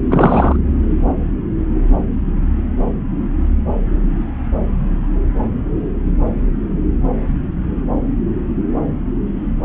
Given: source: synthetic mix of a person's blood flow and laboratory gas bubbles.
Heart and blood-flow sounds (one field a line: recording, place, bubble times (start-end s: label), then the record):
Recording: Doppler ultrasound of blood flow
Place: subclavian vein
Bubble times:
0.09-0.56 s: bubbles
From the record:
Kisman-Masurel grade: 213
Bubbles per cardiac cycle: several, 3 to 8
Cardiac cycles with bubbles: 1 to 10%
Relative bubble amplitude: loud (0.450 to 0.775)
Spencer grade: 1 (occasional bubble signal discernible with the cardiac motion signal, with majority of cardiac periods free of bubbles)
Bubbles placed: anywhere in the cardiac cycle